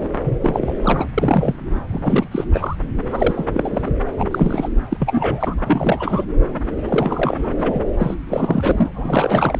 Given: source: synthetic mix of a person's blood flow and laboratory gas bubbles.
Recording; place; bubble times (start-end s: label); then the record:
Doppler ultrasound of blood flow; subclavian vein
0.00-0.08 s: bubbles
0.26-0.73 s: bubbles
0.81-1.05 s: bubbles
1.18-1.56 s: bubbles
1.91-2.29 s: bubbles
2.31-2.46 s: bubbles
2.53-2.76 s: bubbles
3.05-3.46 s: bubbles
3.53-3.90 s: bubbles
4.06-4.09 s: bubbles
4.17-4.68 s: bubbles
4.89-4.97 s: bubbles
5.00-5.54 s: bubbles
5.65-6.25 s: bubbles
6.88-7.54 s: bubbles
7.58-7.80 s: bubbles
7.98-8.14 s: bubbles
8.29-8.88 s: bubbles
8.92-9.58 s: bubbles
From the record:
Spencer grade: 3 (all of the cardiac periods contain showers or single bubble signals, but not dominating or overriding the cardiac motion signals); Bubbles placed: anywhere in the cardiac cycle